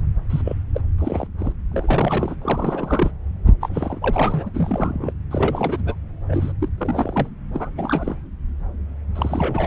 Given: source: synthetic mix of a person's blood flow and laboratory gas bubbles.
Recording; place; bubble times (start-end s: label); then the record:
Doppler ultrasound of blood flow; subclavian vein
0.29-0.41 s: bubbles
0.45-0.56 s: bubbles
0.74-0.80 s: bubbles
0.98-1.27 s: bubbles
1.38-1.52 s: bubbles
1.72-2.35 s: bubbles
2.42-3.12 s: bubbles
3.61-4.50 s: bubbles
4.54-5.12 s: bubbles
5.31-5.83 s: bubbles
5.86-5.95 s: bubbles
6.29-6.53 s: bubbles
6.61-6.69 s: bubbles
6.78-7.29 s: bubbles
7.53-7.71 s: bubbles
7.76-8.15 s: bubbles
9.15-9.67 s: bubbles
From the record:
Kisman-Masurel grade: 332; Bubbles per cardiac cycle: rolling drumbeat, 9 or more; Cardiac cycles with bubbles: 50 to 99%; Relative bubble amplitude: moderate (0.250 to 0.450); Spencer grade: 3 (all of the cardiac periods contain showers or single bubble signals, but not dominating or overriding the cardiac motion signals); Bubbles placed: anywhere in the cardiac cycle